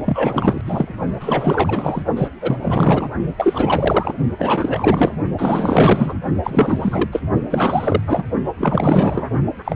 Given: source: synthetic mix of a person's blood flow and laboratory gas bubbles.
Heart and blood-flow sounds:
Doppler ultrasound of blood flow; precordium
0.05-0.61 s: bubbles
0.65-0.94 s: bubbles
1.20-2.02 s: bubbles
2.17-2.28 s: bubbles
2.42-3.08 s: bubbles
3.37-4.14 s: bubbles
4.38-5.16 s: bubbles
5.38-6.14 s: bubbles
6.43-7.22 s: bubbles
7.50-8.02 s: bubbles
8.07-8.24 s: bubbles
8.58-9.28 s: bubbles
9.64-9.76 s: bubbles
From the record:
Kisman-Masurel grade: 444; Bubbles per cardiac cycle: continuous sound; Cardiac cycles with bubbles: 100%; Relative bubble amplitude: maximal (0.775 to 0.999); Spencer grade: 4 (maximum detectable bubble signal sounding continuously throughout systole and diastole of every cardiac period, and overriding the amplitude of the normal cardiac signals); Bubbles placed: only in the low amplitude regions of the cardiac cycle

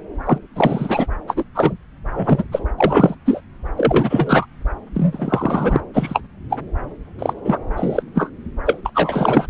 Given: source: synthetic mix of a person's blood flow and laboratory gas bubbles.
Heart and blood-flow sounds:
Doppler ultrasound of blood flow; subclavian vein
0.27-0.39 s: bubbles
0.56-1.06 s: bubbles
1.27-1.44 s: bubbles
1.54-1.74 s: bubbles
2.15-2.44 s: bubbles
2.52-2.62 s: bubbles
2.77-3.15 s: bubbles
3.25-3.40 s: bubbles
3.77-4.46 s: bubbles
4.94-5.80 s: bubbles
5.93-6.22 s: bubbles
6.49-6.59 s: bubbles
7.18-7.33 s: bubbles
7.44-7.58 s: bubbles
7.76-8.03 s: bubbles
8.14-8.29 s: bubbles
8.66-8.80 s: bubbles
8.85-8.90 s: bubbles
8.95-9.46 s: bubbles
From the record:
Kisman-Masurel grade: 243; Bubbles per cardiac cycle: several, 3 to 8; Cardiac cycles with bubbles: 100%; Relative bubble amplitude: loud (0.450 to 0.775); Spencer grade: 3 (all of the cardiac periods contain showers or single bubble signals, but not dominating or overriding the cardiac motion signals); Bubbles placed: anywhere in the cardiac cycle

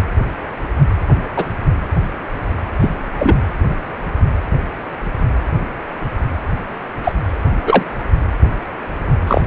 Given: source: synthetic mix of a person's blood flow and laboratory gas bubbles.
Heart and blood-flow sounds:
Doppler ultrasound of blood flow; precordium
1.35-1.46 s: bubbles
2.79-2.88 s: bubbles
3.17-3.52 s: bubbles
7.04-7.12 s: bubbles
7.67-7.83 s: bubbles
9.27-9.47 s: bubbles
From the record:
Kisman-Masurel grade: 123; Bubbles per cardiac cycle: 1 to 2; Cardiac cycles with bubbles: 10 to 50%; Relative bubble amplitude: loud (0.450 to 0.775); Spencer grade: 2 (many but less than half of the cardiac periods contain bubble signals, singularly or in groups); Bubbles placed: anywhere in the cardiac cycle

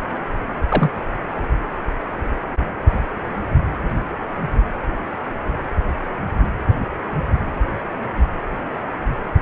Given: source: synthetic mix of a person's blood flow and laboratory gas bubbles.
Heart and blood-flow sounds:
Doppler ultrasound of blood flow; precordium
0.00-0.07 s: bubbles
0.69-0.91 s: bubbles
From the record:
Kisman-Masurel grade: 122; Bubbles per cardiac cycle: 1 to 2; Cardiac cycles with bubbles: 10 to 50%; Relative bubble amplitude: moderate (0.250 to 0.450); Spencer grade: 2 (many but less than half of the cardiac periods contain bubble signals, singularly or in groups); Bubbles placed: anywhere in the cardiac cycle

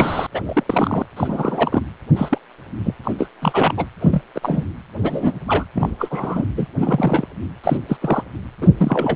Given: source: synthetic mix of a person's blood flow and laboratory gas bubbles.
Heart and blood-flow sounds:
Doppler ultrasound of blood flow; precordium
0.00-0.27 s: bubbles
0.32-0.63 s: bubbles
0.66-1.06 s: bubbles
1.17-1.82 s: bubbles
2.16-2.38 s: bubbles
2.83-2.94 s: bubbles
3.04-3.13 s: bubbles
3.18-3.27 s: bubbles
3.42-3.74 s: bubbles
3.77-3.85 s: bubbles
4.00-4.21 s: bubbles
4.34-4.64 s: bubbles
5.01-5.39 s: bubbles
5.47-5.65 s: bubbles
5.75-5.90 s: bubbles
5.98-6.46 s: bubbles
6.56-6.67 s: bubbles
6.78-7.26 s: bubbles
7.63-7.78 s: bubbles
7.88-7.97 s: bubbles
8.00-8.23 s: bubbles
8.62-8.68 s: bubbles
8.78-9.16 s: bubbles
From the record:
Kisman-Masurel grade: 242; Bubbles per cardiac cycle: several, 3 to 8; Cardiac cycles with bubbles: 100%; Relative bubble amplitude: moderate (0.250 to 0.450); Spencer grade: 3 (all of the cardiac periods contain showers or single bubble signals, but not dominating or overriding the cardiac motion signals); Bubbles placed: anywhere in the cardiac cycle

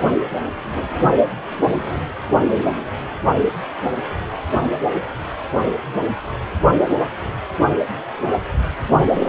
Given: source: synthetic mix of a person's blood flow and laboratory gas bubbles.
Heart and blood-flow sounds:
Doppler ultrasound of blood flow; precordium
9.13-9.29 s: bubbles
From the record:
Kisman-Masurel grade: 213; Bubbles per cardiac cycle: several, 3 to 8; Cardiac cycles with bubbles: 1 to 10%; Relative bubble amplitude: loud (0.450 to 0.775); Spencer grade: 1 (occasional bubble signal discernible with the cardiac motion signal, with majority of cardiac periods free of bubbles); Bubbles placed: only in the low amplitude regions of the cardiac cycle

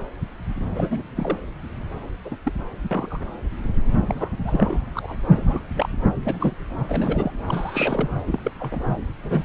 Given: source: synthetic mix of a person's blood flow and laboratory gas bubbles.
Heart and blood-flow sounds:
Doppler ultrasound of blood flow; subclavian vein
0.75-1.02 s: bubbles
1.16-1.38 s: bubbles
2.25-2.36 s: bubbles
2.45-2.53 s: bubbles
2.91-3.25 s: bubbles
4.06-4.30 s: bubbles
4.45-4.79 s: bubbles
4.92-5.16 s: bubbles
5.33-5.63 s: bubbles
5.75-5.89 s: bubbles
6.24-6.52 s: bubbles
6.88-7.31 s: bubbles
7.47-8.08 s: bubbles
8.26-8.54 s: bubbles
8.60-8.80 s: bubbles
9.22-9.42 s: bubbles
From the record:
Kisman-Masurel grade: 232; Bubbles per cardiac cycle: several, 3 to 8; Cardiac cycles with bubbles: 50 to 99%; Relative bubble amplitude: moderate (0.250 to 0.450); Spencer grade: 3 (all of the cardiac periods contain showers or single bubble signals, but not dominating or overriding the cardiac motion signals); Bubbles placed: anywhere in the cardiac cycle

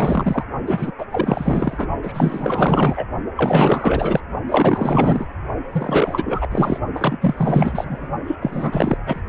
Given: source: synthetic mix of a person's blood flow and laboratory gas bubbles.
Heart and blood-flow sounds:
Doppler ultrasound of blood flow; precordium
0.00-0.43 s: bubbles
0.67-0.92 s: bubbles
0.98-1.05 s: bubbles
1.10-1.88 s: bubbles
2.02-3.04 s: bubbles
3.36-4.21 s: bubbles
4.48-5.26 s: bubbles
5.72-6.47 s: bubbles
6.51-6.79 s: bubbles
6.95-7.17 s: bubbles
7.21-8.09 s: bubbles
8.27-8.36 s: bubbles
8.41-8.97 s: bubbles
9.06-9.21 s: bubbles
From the record:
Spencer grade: 4 (maximum detectable bubble signal sounding continuously throughout systole and diastole of every cardiac period, and overriding the amplitude of the normal cardiac signals); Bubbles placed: only in the low amplitude regions of the cardiac cycle

